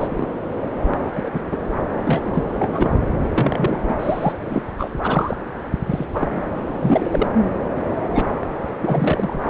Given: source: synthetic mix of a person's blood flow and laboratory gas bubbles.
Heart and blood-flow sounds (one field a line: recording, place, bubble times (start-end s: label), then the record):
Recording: Doppler ultrasound of blood flow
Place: subclavian vein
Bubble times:
0.00-0.28 s: bubbles
0.94-1.30 s: bubbles
1.33-1.43 s: bubbles
1.51-1.57 s: bubbles
2.05-2.43 s: bubbles
2.59-3.00 s: bubbles
3.24-3.79 s: bubbles
3.88-3.94 s: bubbles
3.99-4.33 s: bubbles
4.39-4.62 s: bubbles
4.77-4.90 s: bubbles
5.02-5.36 s: bubbles
5.86-6.05 s: bubbles
6.13-6.41 s: bubbles
6.81-7.29 s: bubbles
8.14-8.25 s: bubbles
8.81-9.49 s: bubbles
From the record:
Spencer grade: 3 (all of the cardiac periods contain showers or single bubble signals, but not dominating or overriding the cardiac motion signals)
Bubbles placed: anywhere in the cardiac cycle